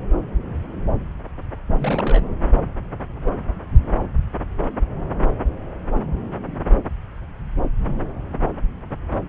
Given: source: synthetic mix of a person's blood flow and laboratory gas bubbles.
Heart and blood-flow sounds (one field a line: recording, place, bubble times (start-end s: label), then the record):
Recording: Doppler ultrasound of blood flow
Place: subclavian vein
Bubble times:
1.77-2.23 s: bubbles
From the record:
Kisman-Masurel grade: 211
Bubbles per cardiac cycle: several, 3 to 8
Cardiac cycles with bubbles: 1 to 10%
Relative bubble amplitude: barely perceptible (0.100 to 0.250)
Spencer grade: 1 (occasional bubble signal discernible with the cardiac motion signal, with majority of cardiac periods free of bubbles)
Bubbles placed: anywhere in the cardiac cycle